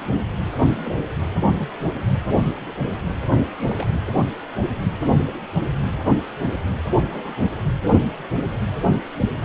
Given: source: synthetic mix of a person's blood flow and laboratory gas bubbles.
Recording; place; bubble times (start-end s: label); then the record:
Doppler ultrasound of blood flow; precordium
0.00-0.04 s: bubbles
0.61-0.92 s: bubbles
1.35-1.57 s: bubbles
1.60-1.71 s: bubbles
3.69-3.86 s: bubbles
6.99-7.35 s: bubbles
From the record:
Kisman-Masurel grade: 121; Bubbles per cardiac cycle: 1 to 2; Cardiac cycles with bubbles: 10 to 50%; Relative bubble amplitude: barely perceptible (0.100 to 0.250); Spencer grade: 2 (many but less than half of the cardiac periods contain bubble signals, singularly or in groups); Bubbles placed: anywhere in the cardiac cycle